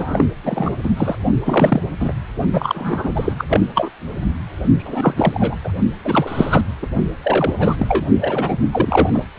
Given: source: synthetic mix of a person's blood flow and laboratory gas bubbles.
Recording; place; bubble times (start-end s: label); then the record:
Doppler ultrasound of blood flow; precordium
0.00-0.24 s: bubbles
0.44-0.74 s: bubbles
0.83-0.90 s: bubbles
0.97-1.15 s: bubbles
1.44-1.82 s: bubbles
2.00-2.12 s: bubbles
2.52-3.35 s: bubbles
3.38-3.45 s: bubbles
3.48-3.60 s: bubbles
3.74-3.90 s: bubbles
4.77-5.14 s: bubbles
5.17-5.56 s: bubbles
5.63-5.72 s: bubbles
6.04-6.61 s: bubbles
6.82-6.88 s: bubbles
7.22-7.54 s: bubbles
7.58-8.05 s: bubbles
8.21-8.57 s: bubbles
8.71-9.10 s: bubbles
9.12-9.27 s: bubbles
From the record:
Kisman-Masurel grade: 343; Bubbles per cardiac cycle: rolling drumbeat, 9 or more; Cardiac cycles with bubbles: 100%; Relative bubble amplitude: loud (0.450 to 0.775); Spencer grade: 3 (all of the cardiac periods contain showers or single bubble signals, but not dominating or overriding the cardiac motion signals); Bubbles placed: only in the low amplitude regions of the cardiac cycle